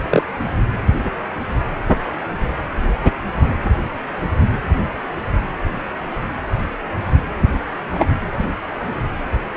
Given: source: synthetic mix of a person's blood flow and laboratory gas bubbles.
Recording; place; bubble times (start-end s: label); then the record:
Doppler ultrasound of blood flow; precordium
0.09-0.22 s: bubbles
7.93-8.07 s: bubbles
From the record:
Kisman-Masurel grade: 123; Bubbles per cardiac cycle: 1 to 2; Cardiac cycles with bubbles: 10 to 50%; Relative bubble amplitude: loud (0.450 to 0.775); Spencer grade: 2 (many but less than half of the cardiac periods contain bubble signals, singularly or in groups); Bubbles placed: anywhere in the cardiac cycle